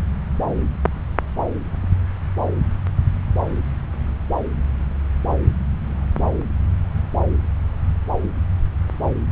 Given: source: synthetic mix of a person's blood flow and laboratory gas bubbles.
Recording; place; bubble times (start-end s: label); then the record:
Doppler ultrasound of blood flow; subclavian vein
no bubbles
From the record:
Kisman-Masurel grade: 000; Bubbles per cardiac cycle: 0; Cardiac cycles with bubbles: 0%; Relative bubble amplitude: no bubbles discernible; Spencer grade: 0 (complete lack of bubble signals)